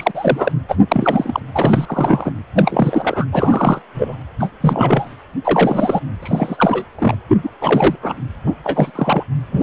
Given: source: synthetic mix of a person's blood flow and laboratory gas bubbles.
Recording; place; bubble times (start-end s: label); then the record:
Doppler ultrasound of blood flow; precordium
0.00-0.11 s: bubbles
0.14-0.52 s: bubbles
0.69-0.75 s: bubbles
0.91-1.40 s: bubbles
1.52-2.32 s: bubbles
2.56-3.25 s: bubbles
3.32-3.82 s: bubbles
3.94-4.18 s: bubbles
4.39-4.50 s: bubbles
4.61-5.14 s: bubbles
5.44-6.00 s: bubbles
6.22-6.84 s: bubbles
6.98-7.15 s: bubbles
7.29-7.51 s: bubbles
7.61-7.96 s: bubbles
8.03-8.15 s: bubbles
8.46-8.54 s: bubbles
8.63-8.91 s: bubbles
8.95-9.23 s: bubbles
9.51-9.63 s: bubbles
From the record:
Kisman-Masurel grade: 343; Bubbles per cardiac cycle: rolling drumbeat, 9 or more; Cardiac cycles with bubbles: 100%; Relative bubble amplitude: loud (0.450 to 0.775); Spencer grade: 3 (all of the cardiac periods contain showers or single bubble signals, but not dominating or overriding the cardiac motion signals); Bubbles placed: anywhere in the cardiac cycle